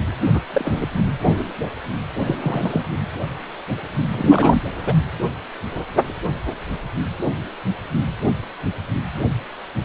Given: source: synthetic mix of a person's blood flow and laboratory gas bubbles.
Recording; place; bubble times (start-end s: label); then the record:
Doppler ultrasound of blood flow; precordium
0.06-0.11 s: bubbles
0.34-0.41 s: bubbles
0.53-0.87 s: bubbles
2.25-2.37 s: bubbles
2.42-2.83 s: bubbles
4.12-4.62 s: bubbles
4.85-4.93 s: bubbles
From the record:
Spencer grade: 2 (many but less than half of the cardiac periods contain bubble signals, singularly or in groups); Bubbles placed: anywhere in the cardiac cycle